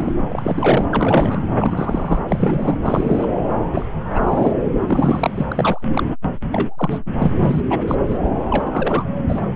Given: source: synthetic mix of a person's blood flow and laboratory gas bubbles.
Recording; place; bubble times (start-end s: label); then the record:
Doppler ultrasound of blood flow; subclavian vein
0.00-0.12 s: bubbles
0.30-0.85 s: bubbles
0.91-1.44 s: bubbles
1.59-2.20 s: bubbles
2.28-2.78 s: bubbles
2.83-3.27 s: bubbles
3.73-3.86 s: bubbles
4.14-4.51 s: bubbles
4.81-5.46 s: bubbles
5.51-5.88 s: bubbles
5.91-6.03 s: bubbles
6.52-6.99 s: bubbles
7.19-7.62 s: bubbles
7.69-7.83 s: bubbles
7.88-7.95 s: bubbles
8.05-8.19 s: bubbles
8.50-9.07 s: bubbles
9.29-9.41 s: bubbles
From the record:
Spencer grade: 3 (all of the cardiac periods contain showers or single bubble signals, but not dominating or overriding the cardiac motion signals); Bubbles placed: anywhere in the cardiac cycle